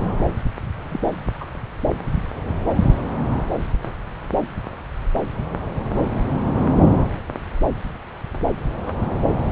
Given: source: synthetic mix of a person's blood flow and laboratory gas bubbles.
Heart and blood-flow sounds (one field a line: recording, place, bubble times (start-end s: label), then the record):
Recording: Doppler ultrasound of blood flow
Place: subclavian vein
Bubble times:
0.91-0.99 s: bubbles
1.40-1.45 s: bubbles
From the record:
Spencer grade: 1 (occasional bubble signal discernible with the cardiac motion signal, with majority of cardiac periods free of bubbles)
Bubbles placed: anywhere in the cardiac cycle